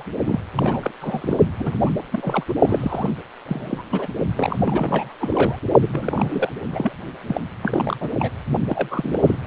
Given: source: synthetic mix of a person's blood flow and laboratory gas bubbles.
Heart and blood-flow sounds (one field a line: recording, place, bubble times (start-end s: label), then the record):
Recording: Doppler ultrasound of blood flow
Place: precordium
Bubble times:
0.00-0.03 s: bubbles
0.25-0.40 s: bubbles
0.55-0.91 s: bubbles
1.01-1.38 s: bubbles
1.59-1.76 s: bubbles
1.81-1.92 s: bubbles
2.11-2.44 s: bubbles
2.48-2.53 s: bubbles
2.62-3.10 s: bubbles
3.46-3.85 s: bubbles
3.91-4.07 s: bubbles
4.35-4.58 s: bubbles
4.64-5.15 s: bubbles
5.20-5.56 s: bubbles
5.81-5.88 s: bubbles
5.92-6.50 s: bubbles
6.71-6.92 s: bubbles
7.27-7.41 s: bubbles
7.61-7.96 s: bubbles
8.00-8.10 s: bubbles
8.19-8.30 s: bubbles
8.66-9.19 s: bubbles
9.22-9.38 s: bubbles
From the record:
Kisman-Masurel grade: 342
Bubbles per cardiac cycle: rolling drumbeat, 9 or more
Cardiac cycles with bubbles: 100%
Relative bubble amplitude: moderate (0.250 to 0.450)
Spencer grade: 3 (all of the cardiac periods contain showers or single bubble signals, but not dominating or overriding the cardiac motion signals)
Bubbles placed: only in the low amplitude regions of the cardiac cycle